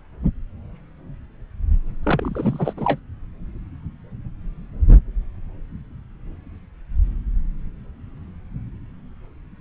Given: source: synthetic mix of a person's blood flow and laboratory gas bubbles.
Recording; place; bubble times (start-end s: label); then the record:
Doppler ultrasound of blood flow; subclavian vein
2.03-2.73 s: bubbles
2.76-2.99 s: bubbles
From the record:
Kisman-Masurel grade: 212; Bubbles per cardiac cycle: several, 3 to 8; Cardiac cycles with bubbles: 1 to 10%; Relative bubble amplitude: moderate (0.250 to 0.450); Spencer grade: 1 (occasional bubble signal discernible with the cardiac motion signal, with majority of cardiac periods free of bubbles); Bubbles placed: anywhere in the cardiac cycle